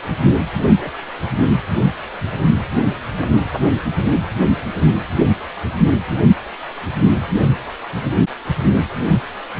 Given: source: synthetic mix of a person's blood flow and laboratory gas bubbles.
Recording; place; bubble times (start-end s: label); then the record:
Doppler ultrasound of blood flow; precordium
0.78-0.91 s: bubbles
1.79-1.90 s: bubbles
2.73-2.91 s: bubbles
3.16-3.50 s: bubbles
From the record:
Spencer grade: 2 (many but less than half of the cardiac periods contain bubble signals, singularly or in groups); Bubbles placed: only in the low amplitude regions of the cardiac cycle